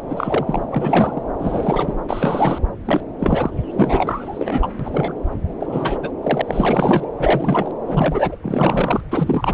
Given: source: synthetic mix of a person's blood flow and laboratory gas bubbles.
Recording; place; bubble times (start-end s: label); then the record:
Doppler ultrasound of blood flow; subclavian vein
0.08-0.65 s: bubbles
0.70-1.22 s: bubbles
1.38-1.95 s: bubbles
2.08-2.58 s: bubbles
2.85-3.01 s: bubbles
3.19-3.50 s: bubbles
3.73-4.67 s: bubbles
4.79-5.14 s: bubbles
5.59-6.12 s: bubbles
6.22-6.42 s: bubbles
6.47-7.07 s: bubbles
7.17-7.71 s: bubbles
7.86-8.36 s: bubbles
8.42-9.00 s: bubbles
9.09-9.54 s: bubbles
From the record:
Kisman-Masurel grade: 343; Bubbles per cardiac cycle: rolling drumbeat, 9 or more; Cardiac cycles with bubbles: 100%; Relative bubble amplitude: loud (0.450 to 0.775); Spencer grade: 3 (all of the cardiac periods contain showers or single bubble signals, but not dominating or overriding the cardiac motion signals); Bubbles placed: anywhere in the cardiac cycle